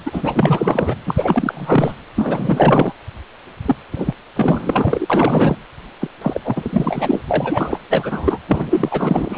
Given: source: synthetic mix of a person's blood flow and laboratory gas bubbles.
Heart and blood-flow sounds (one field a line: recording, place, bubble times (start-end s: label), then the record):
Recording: Doppler ultrasound of blood flow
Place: precordium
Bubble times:
0.05-0.96 s: bubbles
1.05-1.93 s: bubbles
2.16-2.93 s: bubbles
3.65-3.76 s: bubbles
3.91-4.15 s: bubbles
4.36-5.06 s: bubbles
5.10-5.56 s: bubbles
6.01-6.09 s: bubbles
6.21-6.40 s: bubbles
6.44-7.22 s: bubbles
7.27-7.80 s: bubbles
7.90-8.38 s: bubbles
8.47-9.38 s: bubbles
From the record:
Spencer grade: 4 (maximum detectable bubble signal sounding continuously throughout systole and diastole of every cardiac period, and overriding the amplitude of the normal cardiac signals)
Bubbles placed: anywhere in the cardiac cycle